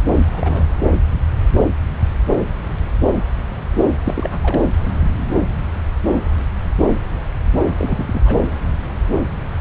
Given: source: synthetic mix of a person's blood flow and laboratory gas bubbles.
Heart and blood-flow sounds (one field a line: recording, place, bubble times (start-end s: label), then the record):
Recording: Doppler ultrasound of blood flow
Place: subclavian vein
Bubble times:
0.14-0.25 s: bubbles
0.32-0.66 s: bubbles
4.05-4.39 s: bubbles
4.42-4.61 s: bubbles
7.77-8.21 s: bubbles
8.26-8.37 s: bubbles
From the record:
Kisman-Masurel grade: 222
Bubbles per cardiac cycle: several, 3 to 8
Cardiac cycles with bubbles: 10 to 50%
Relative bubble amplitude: moderate (0.250 to 0.450)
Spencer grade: 2 (many but less than half of the cardiac periods contain bubble signals, singularly or in groups)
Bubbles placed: anywhere in the cardiac cycle